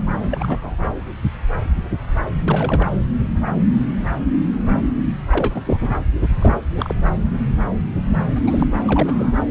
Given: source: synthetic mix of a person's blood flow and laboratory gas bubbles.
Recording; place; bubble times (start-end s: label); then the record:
Doppler ultrasound of blood flow; subclavian vein
0.31-0.97 s: bubbles
2.40-2.92 s: bubbles
5.32-5.51 s: bubbles
5.54-5.62 s: bubbles
5.66-5.92 s: bubbles
6.39-6.56 s: bubbles
6.75-6.94 s: bubbles
8.35-8.40 s: bubbles
8.43-8.67 s: bubbles
8.86-9.33 s: bubbles
From the record:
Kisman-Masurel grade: 222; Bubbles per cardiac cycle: several, 3 to 8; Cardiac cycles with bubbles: 10 to 50%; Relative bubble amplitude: moderate (0.250 to 0.450); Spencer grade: 2 (many but less than half of the cardiac periods contain bubble signals, singularly or in groups); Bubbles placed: anywhere in the cardiac cycle